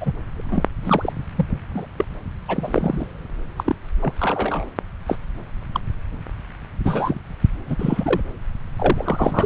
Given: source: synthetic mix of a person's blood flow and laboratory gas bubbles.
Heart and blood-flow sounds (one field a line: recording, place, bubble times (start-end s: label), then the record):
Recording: Doppler ultrasound of blood flow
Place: subclavian vein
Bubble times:
0.01-0.12 s: bubbles
0.34-0.63 s: bubbles
0.85-1.12 s: bubbles
1.35-1.46 s: bubbles
1.74-1.86 s: bubbles
1.98-2.04 s: bubbles
2.48-3.07 s: bubbles
3.56-3.75 s: bubbles
4.02-4.13 s: bubbles
4.20-4.65 s: bubbles
5.07-5.16 s: bubbles
5.72-5.80 s: bubbles
6.85-7.21 s: bubbles
7.66-7.76 s: bubbles
7.79-8.20 s: bubbles
8.76-9.45 s: bubbles
From the record:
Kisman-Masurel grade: 242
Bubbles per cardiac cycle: several, 3 to 8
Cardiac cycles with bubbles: 100%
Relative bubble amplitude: moderate (0.250 to 0.450)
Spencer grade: 3 (all of the cardiac periods contain showers or single bubble signals, but not dominating or overriding the cardiac motion signals)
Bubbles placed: anywhere in the cardiac cycle